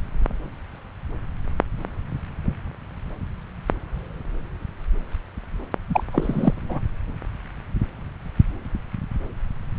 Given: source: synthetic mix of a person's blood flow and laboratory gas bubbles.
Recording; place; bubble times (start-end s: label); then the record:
Doppler ultrasound of blood flow; subclavian vein
5.89-6.04 s: bubbles
6.12-6.54 s: bubbles
6.57-6.80 s: bubbles
From the record:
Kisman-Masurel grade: 212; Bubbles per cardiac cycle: several, 3 to 8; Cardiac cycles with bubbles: 1 to 10%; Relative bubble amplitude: moderate (0.250 to 0.450); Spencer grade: 1 (occasional bubble signal discernible with the cardiac motion signal, with majority of cardiac periods free of bubbles); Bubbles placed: anywhere in the cardiac cycle